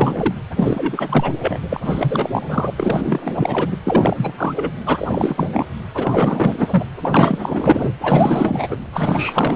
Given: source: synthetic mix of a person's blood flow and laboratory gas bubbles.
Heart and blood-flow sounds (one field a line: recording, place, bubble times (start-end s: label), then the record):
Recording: Doppler ultrasound of blood flow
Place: precordium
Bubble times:
0.00-0.35 s: bubbles
0.56-1.32 s: bubbles
1.39-1.57 s: bubbles
1.70-1.81 s: bubbles
1.84-2.74 s: bubbles
2.77-3.77 s: bubbles
3.84-4.33 s: bubbles
4.38-4.71 s: bubbles
4.86-5.47 s: bubbles
5.53-5.67 s: bubbles
5.94-6.83 s: bubbles
7.00-7.91 s: bubbles
8.01-8.68 s: bubbles
8.70-8.77 s: bubbles
8.92-9.56 s: bubbles
From the record:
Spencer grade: 4 (maximum detectable bubble signal sounding continuously throughout systole and diastole of every cardiac period, and overriding the amplitude of the normal cardiac signals)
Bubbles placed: anywhere in the cardiac cycle